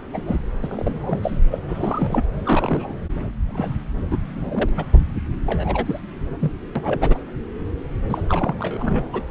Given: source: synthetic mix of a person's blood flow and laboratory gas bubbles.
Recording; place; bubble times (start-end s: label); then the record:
Doppler ultrasound of blood flow; subclavian vein
0.13-0.36 s: bubbles
0.62-1.39 s: bubbles
1.51-1.59 s: bubbles
1.68-2.22 s: bubbles
2.44-2.93 s: bubbles
3.48-3.73 s: bubbles
4.11-4.17 s: bubbles
4.36-4.69 s: bubbles
4.77-4.85 s: bubbles
5.46-6.00 s: bubbles
6.39-6.52 s: bubbles
6.75-7.17 s: bubbles
8.09-8.21 s: bubbles
8.29-8.55 s: bubbles
8.58-9.03 s: bubbles
9.13-9.22 s: bubbles
From the record:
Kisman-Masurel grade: 242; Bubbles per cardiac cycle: several, 3 to 8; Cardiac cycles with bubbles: 100%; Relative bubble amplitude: moderate (0.250 to 0.450); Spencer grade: 3 (all of the cardiac periods contain showers or single bubble signals, but not dominating or overriding the cardiac motion signals); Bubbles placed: anywhere in the cardiac cycle